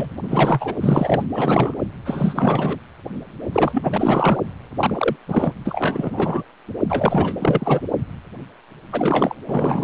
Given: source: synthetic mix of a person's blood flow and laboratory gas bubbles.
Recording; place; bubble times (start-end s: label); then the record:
Doppler ultrasound of blood flow; precordium
0.00-0.10 s: bubbles
0.22-0.73 s: bubbles
0.81-1.23 s: bubbles
1.33-1.75 s: bubbles
2.05-2.79 s: bubbles
3.52-4.38 s: bubbles
4.78-5.16 s: bubbles
5.27-5.52 s: bubbles
5.64-6.43 s: bubbles
6.89-7.34 s: bubbles
7.39-7.80 s: bubbles
8.92-9.35 s: bubbles
9.48-9.84 s: bubbles
From the record:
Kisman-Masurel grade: 333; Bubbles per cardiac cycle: rolling drumbeat, 9 or more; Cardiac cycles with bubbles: 50 to 99%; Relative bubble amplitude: loud (0.450 to 0.775); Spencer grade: 3 (all of the cardiac periods contain showers or single bubble signals, but not dominating or overriding the cardiac motion signals); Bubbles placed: anywhere in the cardiac cycle